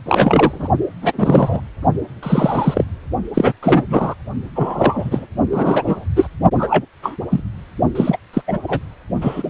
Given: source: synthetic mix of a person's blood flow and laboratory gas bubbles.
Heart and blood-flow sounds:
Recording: Doppler ultrasound of blood flow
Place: precordium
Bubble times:
0.06-0.69 s: bubbles
1.02-1.12 s: bubbles
1.18-1.60 s: bubbles
2.22-2.84 s: bubbles
3.34-3.52 s: bubbles
3.62-3.83 s: bubbles
3.90-4.14 s: bubbles
4.55-5.26 s: bubbles
5.51-6.05 s: bubbles
6.16-6.27 s: bubbles
6.58-6.85 s: bubbles
7.02-7.16 s: bubbles
7.30-7.42 s: bubbles
7.95-8.18 s: bubbles
8.33-8.42 s: bubbles
8.47-8.58 s: bubbles
8.63-8.81 s: bubbles
9.21-9.50 s: bubbles
From the record:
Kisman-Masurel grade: 243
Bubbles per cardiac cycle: several, 3 to 8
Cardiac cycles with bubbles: 100%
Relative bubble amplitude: loud (0.450 to 0.775)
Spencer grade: 3 (all of the cardiac periods contain showers or single bubble signals, but not dominating or overriding the cardiac motion signals)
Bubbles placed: only in the low amplitude regions of the cardiac cycle

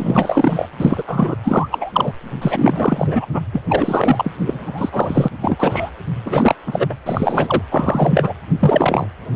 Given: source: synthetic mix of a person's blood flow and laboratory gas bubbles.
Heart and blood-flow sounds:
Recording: Doppler ultrasound of blood flow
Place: precordium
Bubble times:
0.00-0.67 s: bubbles
0.79-1.03 s: bubbles
1.07-1.36 s: bubbles
1.43-2.13 s: bubbles
2.42-3.26 s: bubbles
3.31-3.40 s: bubbles
3.53-3.62 s: bubbles
3.69-4.31 s: bubbles
4.44-4.89 s: bubbles
4.92-5.29 s: bubbles
5.42-5.90 s: bubbles
6.25-6.54 s: bubbles
6.67-6.86 s: bubbles
6.89-6.96 s: bubbles
7.05-7.62 s: bubbles
7.71-8.34 s: bubbles
8.59-9.07 s: bubbles
From the record:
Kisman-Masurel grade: 343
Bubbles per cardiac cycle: rolling drumbeat, 9 or more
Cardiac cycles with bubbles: 100%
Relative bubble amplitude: loud (0.450 to 0.775)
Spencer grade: 3 (all of the cardiac periods contain showers or single bubble signals, but not dominating or overriding the cardiac motion signals)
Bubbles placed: anywhere in the cardiac cycle

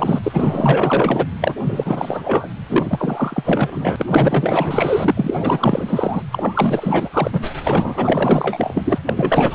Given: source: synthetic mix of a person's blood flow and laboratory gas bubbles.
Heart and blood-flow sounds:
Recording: Doppler ultrasound of blood flow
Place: precordium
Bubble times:
0.00-0.19 s: bubbles
0.23-1.27 s: bubbles
1.41-1.55 s: bubbles
1.64-2.49 s: bubbles
2.69-5.12 s: bubbles
5.15-6.22 s: bubbles
6.31-7.09 s: bubbles
7.12-7.42 s: bubbles
7.64-8.99 s: bubbles
9.06-9.13 s: bubbles
9.16-9.55 s: bubbles
From the record:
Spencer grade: 4 (maximum detectable bubble signal sounding continuously throughout systole and diastole of every cardiac period, and overriding the amplitude of the normal cardiac signals)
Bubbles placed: anywhere in the cardiac cycle

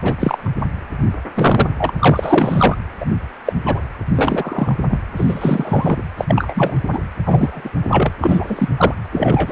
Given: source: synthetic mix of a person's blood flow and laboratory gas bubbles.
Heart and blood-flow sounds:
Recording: Doppler ultrasound of blood flow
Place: precordium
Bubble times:
0.02-0.14 s: bubbles
0.20-0.51 s: bubbles
1.34-1.70 s: bubbles
1.78-1.91 s: bubbles
1.99-2.77 s: bubbles
3.00-3.05 s: bubbles
3.45-3.53 s: bubbles
3.65-3.79 s: bubbles
4.16-4.75 s: bubbles
4.91-4.99 s: bubbles
5.17-6.03 s: bubbles
6.18-6.83 s: bubbles
6.92-6.99 s: bubbles
7.25-7.70 s: bubbles
7.90-8.12 s: bubbles
8.21-8.69 s: bubbles
8.78-8.94 s: bubbles
9.12-9.52 s: bubbles
From the record:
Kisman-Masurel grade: 243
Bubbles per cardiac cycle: several, 3 to 8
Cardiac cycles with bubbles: 100%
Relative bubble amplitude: loud (0.450 to 0.775)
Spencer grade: 3 (all of the cardiac periods contain showers or single bubble signals, but not dominating or overriding the cardiac motion signals)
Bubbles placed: anywhere in the cardiac cycle

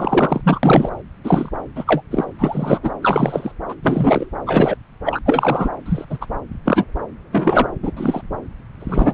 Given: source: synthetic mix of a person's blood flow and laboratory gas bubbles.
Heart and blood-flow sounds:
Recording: Doppler ultrasound of blood flow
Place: subclavian vein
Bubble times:
0.00-0.41 s: bubbles
0.44-0.60 s: bubbles
0.63-0.89 s: bubbles
1.24-1.50 s: bubbles
1.76-1.84 s: bubbles
1.86-2.02 s: bubbles
2.10-2.25 s: bubbles
2.38-2.79 s: bubbles
2.83-2.91 s: bubbles
3.02-3.52 s: bubbles
3.69-3.75 s: bubbles
3.82-4.30 s: bubbles
4.46-4.77 s: bubbles
5.06-5.19 s: bubbles
5.25-5.70 s: bubbles
5.86-6.05 s: bubbles
6.09-6.18 s: bubbles
6.21-6.26 s: bubbles
6.65-6.84 s: bubbles
7.33-7.67 s: bubbles
7.83-7.91 s: bubbles
7.97-8.21 s: bubbles
8.80-9.13 s: bubbles
From the record:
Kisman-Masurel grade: 243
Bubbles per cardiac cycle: several, 3 to 8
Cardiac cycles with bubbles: 100%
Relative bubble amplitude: loud (0.450 to 0.775)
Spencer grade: 3 (all of the cardiac periods contain showers or single bubble signals, but not dominating or overriding the cardiac motion signals)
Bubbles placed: anywhere in the cardiac cycle

